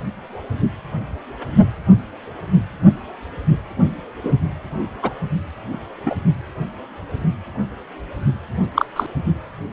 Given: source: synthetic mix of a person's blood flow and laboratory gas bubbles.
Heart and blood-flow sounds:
Doppler ultrasound of blood flow; precordium
4.23-4.33 s: bubbles
5.02-5.11 s: bubbles
6.05-6.15 s: bubbles
8.75-8.85 s: bubbles
8.96-9.06 s: bubbles
From the record:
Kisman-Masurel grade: 123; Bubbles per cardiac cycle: 1 to 2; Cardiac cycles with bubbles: 10 to 50%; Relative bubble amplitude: loud (0.450 to 0.775); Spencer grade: 2 (many but less than half of the cardiac periods contain bubble signals, singularly or in groups); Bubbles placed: only in the low amplitude regions of the cardiac cycle

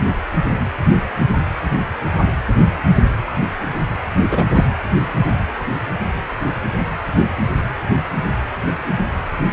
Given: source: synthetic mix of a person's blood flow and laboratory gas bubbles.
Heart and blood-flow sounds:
Doppler ultrasound of blood flow; precordium
4.31-4.45 s: bubbles
4.54-4.64 s: bubbles
From the record:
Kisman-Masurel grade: 113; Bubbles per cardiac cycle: 1 to 2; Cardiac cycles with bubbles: 1 to 10%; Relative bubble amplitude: loud (0.450 to 0.775); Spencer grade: 1 (occasional bubble signal discernible with the cardiac motion signal, with majority of cardiac periods free of bubbles); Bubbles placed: anywhere in the cardiac cycle

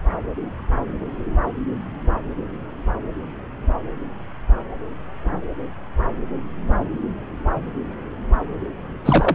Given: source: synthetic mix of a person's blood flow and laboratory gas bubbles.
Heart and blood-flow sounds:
Doppler ultrasound of blood flow; subclavian vein
9.05-9.35 s: bubbles
From the record:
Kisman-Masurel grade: 213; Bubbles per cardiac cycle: several, 3 to 8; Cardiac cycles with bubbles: 1 to 10%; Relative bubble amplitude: loud (0.450 to 0.775); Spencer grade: 1 (occasional bubble signal discernible with the cardiac motion signal, with majority of cardiac periods free of bubbles); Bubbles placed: anywhere in the cardiac cycle

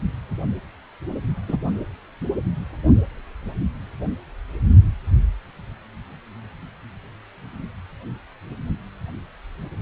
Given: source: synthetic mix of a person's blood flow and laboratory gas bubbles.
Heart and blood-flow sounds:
Doppler ultrasound of blood flow; precordium
1.48-1.57 s: bubbles
From the record:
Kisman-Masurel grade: 113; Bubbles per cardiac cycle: 1 to 2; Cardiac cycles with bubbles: 1 to 10%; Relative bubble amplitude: loud (0.450 to 0.775); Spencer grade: 1 (occasional bubble signal discernible with the cardiac motion signal, with majority of cardiac periods free of bubbles); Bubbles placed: only in the low amplitude regions of the cardiac cycle

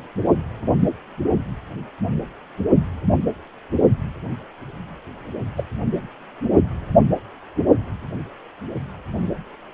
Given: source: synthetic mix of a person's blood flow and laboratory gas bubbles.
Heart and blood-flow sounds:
Doppler ultrasound of blood flow; precordium
5.56-5.64 s: bubbles
From the record:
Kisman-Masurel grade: 111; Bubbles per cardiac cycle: 1 to 2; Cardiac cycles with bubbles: 1 to 10%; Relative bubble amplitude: barely perceptible (0.100 to 0.250); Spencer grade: 1 (occasional bubble signal discernible with the cardiac motion signal, with majority of cardiac periods free of bubbles); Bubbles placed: only in the low amplitude regions of the cardiac cycle

